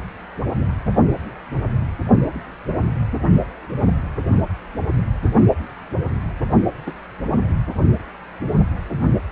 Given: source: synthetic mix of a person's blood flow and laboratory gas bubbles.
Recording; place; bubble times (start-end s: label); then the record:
Doppler ultrasound of blood flow; precordium
6.87-6.92 s: bubbles
From the record:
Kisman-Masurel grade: 113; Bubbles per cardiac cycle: 1 to 2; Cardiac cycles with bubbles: 1 to 10%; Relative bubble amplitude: loud (0.450 to 0.775); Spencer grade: 1 (occasional bubble signal discernible with the cardiac motion signal, with majority of cardiac periods free of bubbles); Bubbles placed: only in the low amplitude regions of the cardiac cycle